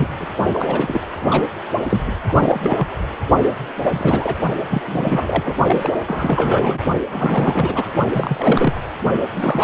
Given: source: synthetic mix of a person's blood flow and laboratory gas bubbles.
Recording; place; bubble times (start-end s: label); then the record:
Doppler ultrasound of blood flow; precordium
0.00-0.08 s: bubbles
0.20-0.27 s: bubbles
0.54-1.01 s: bubbles
1.21-1.44 s: bubbles
1.89-2.12 s: bubbles
2.28-2.87 s: bubbles
3.83-4.33 s: bubbles
4.70-4.82 s: bubbles
4.87-5.54 s: bubbles
5.66-5.90 s: bubbles
6.07-6.79 s: bubbles
7.10-7.87 s: bubbles
8.13-8.82 s: bubbles
9.36-9.64 s: bubbles
From the record:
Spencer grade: 3 (all of the cardiac periods contain showers or single bubble signals, but not dominating or overriding the cardiac motion signals); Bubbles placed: only in the low amplitude regions of the cardiac cycle